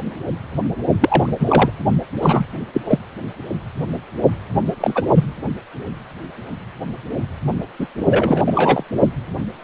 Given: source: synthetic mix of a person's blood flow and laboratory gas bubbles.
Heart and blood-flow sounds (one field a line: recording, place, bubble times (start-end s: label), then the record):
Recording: Doppler ultrasound of blood flow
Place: precordium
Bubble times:
1.00-1.34 s: bubbles
1.40-1.70 s: bubbles
2.22-2.45 s: bubbles
2.73-2.81 s: bubbles
2.85-2.98 s: bubbles
4.80-5.07 s: bubbles
5.14-5.25 s: bubbles
7.79-7.87 s: bubbles
8.08-8.83 s: bubbles
From the record:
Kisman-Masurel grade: 233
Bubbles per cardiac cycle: several, 3 to 8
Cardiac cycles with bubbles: 50 to 99%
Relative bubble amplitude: loud (0.450 to 0.775)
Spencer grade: 3 (all of the cardiac periods contain showers or single bubble signals, but not dominating or overriding the cardiac motion signals)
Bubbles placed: only in the low amplitude regions of the cardiac cycle